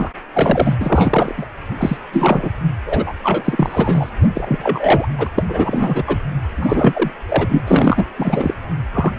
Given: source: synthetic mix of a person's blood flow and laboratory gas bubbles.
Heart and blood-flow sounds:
Doppler ultrasound of blood flow; precordium
0.00-0.09 s: bubbles
0.34-0.75 s: bubbles
0.80-1.46 s: bubbles
1.78-1.97 s: bubbles
2.12-2.51 s: bubbles
2.85-3.12 s: bubbles
3.23-4.09 s: bubbles
4.34-5.08 s: bubbles
5.17-5.28 s: bubbles
5.36-5.44 s: bubbles
5.49-6.04 s: bubbles
6.07-6.17 s: bubbles
6.56-7.11 s: bubbles
7.29-7.62 s: bubbles
7.67-8.05 s: bubbles
8.16-8.54 s: bubbles
8.94-9.11 s: bubbles
From the record:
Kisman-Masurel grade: 343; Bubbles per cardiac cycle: rolling drumbeat, 9 or more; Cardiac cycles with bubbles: 100%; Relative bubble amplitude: loud (0.450 to 0.775); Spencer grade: 3 (all of the cardiac periods contain showers or single bubble signals, but not dominating or overriding the cardiac motion signals); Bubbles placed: anywhere in the cardiac cycle

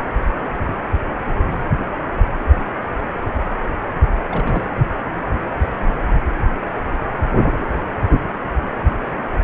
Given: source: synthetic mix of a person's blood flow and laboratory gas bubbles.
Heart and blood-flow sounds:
Doppler ultrasound of blood flow; precordium
4.30-4.65 s: bubbles
From the record:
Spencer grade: 1 (occasional bubble signal discernible with the cardiac motion signal, with majority of cardiac periods free of bubbles); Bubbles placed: anywhere in the cardiac cycle

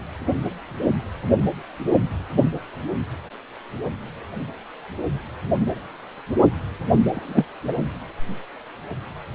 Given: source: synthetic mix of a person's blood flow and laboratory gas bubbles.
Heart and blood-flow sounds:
Doppler ultrasound of blood flow; precordium
7.13-7.45 s: bubbles
7.68-7.72 s: bubbles
From the record:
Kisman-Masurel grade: 113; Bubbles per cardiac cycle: 1 to 2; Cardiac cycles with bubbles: 1 to 10%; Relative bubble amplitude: loud (0.450 to 0.775); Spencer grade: 1 (occasional bubble signal discernible with the cardiac motion signal, with majority of cardiac periods free of bubbles); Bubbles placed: anywhere in the cardiac cycle

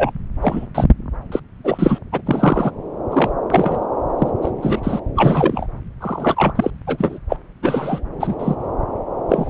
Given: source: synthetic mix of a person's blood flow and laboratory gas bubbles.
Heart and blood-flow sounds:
Doppler ultrasound of blood flow; subclavian vein
0.00-0.11 s: bubbles
0.41-0.66 s: bubbles
0.74-0.84 s: bubbles
1.31-1.40 s: bubbles
1.64-1.99 s: bubbles
2.12-2.21 s: bubbles
2.26-2.71 s: bubbles
3.10-3.31 s: bubbles
3.50-3.86 s: bubbles
4.18-4.31 s: bubbles
4.42-4.51 s: bubbles
4.62-4.80 s: bubbles
4.83-5.00 s: bubbles
5.16-5.66 s: bubbles
6.00-6.53 s: bubbles
6.55-6.71 s: bubbles
6.87-7.19 s: bubbles
7.29-7.37 s: bubbles
7.62-8.01 s: bubbles
8.20-8.35 s: bubbles
8.38-8.56 s: bubbles
9.29-9.49 s: bubbles
From the record:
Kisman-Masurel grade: 243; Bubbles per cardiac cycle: several, 3 to 8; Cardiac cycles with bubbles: 100%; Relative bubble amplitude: loud (0.450 to 0.775); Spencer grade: 3 (all of the cardiac periods contain showers or single bubble signals, but not dominating or overriding the cardiac motion signals); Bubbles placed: anywhere in the cardiac cycle

